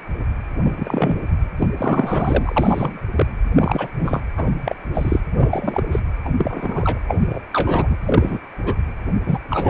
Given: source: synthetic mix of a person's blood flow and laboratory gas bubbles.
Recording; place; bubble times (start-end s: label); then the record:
Doppler ultrasound of blood flow; precordium
0.00-0.03 s: bubbles
0.63-1.21 s: bubbles
1.58-1.68 s: bubbles
1.77-3.02 s: bubbles
3.12-3.26 s: bubbles
3.54-3.88 s: bubbles
3.99-4.21 s: bubbles
4.37-4.51 s: bubbles
4.65-4.75 s: bubbles
4.94-5.21 s: bubbles
5.34-5.83 s: bubbles
5.91-6.00 s: bubbles
6.25-6.29 s: bubbles
6.37-7.00 s: bubbles
7.08-7.39 s: bubbles
7.50-7.96 s: bubbles
8.03-8.39 s: bubbles
8.65-8.74 s: bubbles
9.26-9.38 s: bubbles
9.50-9.70 s: bubbles
From the record:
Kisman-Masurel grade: 243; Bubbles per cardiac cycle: several, 3 to 8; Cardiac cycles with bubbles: 100%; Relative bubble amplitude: loud (0.450 to 0.775); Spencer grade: 3 (all of the cardiac periods contain showers or single bubble signals, but not dominating or overriding the cardiac motion signals); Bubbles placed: anywhere in the cardiac cycle